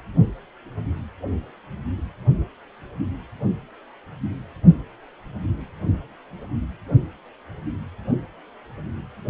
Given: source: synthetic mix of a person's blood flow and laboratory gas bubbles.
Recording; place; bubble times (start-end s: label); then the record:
Doppler ultrasound of blood flow; precordium
no bubbles
From the record:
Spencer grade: 0 (complete lack of bubble signals)